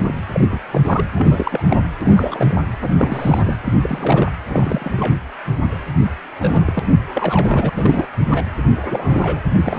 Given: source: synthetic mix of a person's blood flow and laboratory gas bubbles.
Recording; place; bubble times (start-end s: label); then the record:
Doppler ultrasound of blood flow; precordium
0.00-0.19 s: bubbles
0.33-0.59 s: bubbles
0.72-0.81 s: bubbles
0.84-1.05 s: bubbles
1.14-1.81 s: bubbles
2.01-2.65 s: bubbles
2.82-3.56 s: bubbles
3.65-4.32 s: bubbles
4.49-4.92 s: bubbles
4.96-5.15 s: bubbles
5.62-5.75 s: bubbles
6.02-6.11 s: bubbles
6.40-6.79 s: bubbles
6.87-6.92 s: bubbles
7.15-7.70 s: bubbles
7.75-8.08 s: bubbles
8.28-8.45 s: bubbles
8.82-9.42 s: bubbles
9.62-9.79 s: bubbles
From the record:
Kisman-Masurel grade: 342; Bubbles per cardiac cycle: rolling drumbeat, 9 or more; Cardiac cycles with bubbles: 100%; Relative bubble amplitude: moderate (0.250 to 0.450); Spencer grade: 3 (all of the cardiac periods contain showers or single bubble signals, but not dominating or overriding the cardiac motion signals); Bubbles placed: anywhere in the cardiac cycle